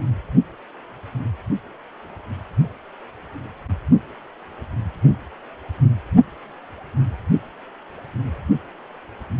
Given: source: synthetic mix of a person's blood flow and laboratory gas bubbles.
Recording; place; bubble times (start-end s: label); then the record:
Doppler ultrasound of blood flow; precordium
no bubbles
From the record:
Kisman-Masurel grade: 000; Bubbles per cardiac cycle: 0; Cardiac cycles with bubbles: 0%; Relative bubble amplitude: no bubbles discernible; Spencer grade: 0 (complete lack of bubble signals)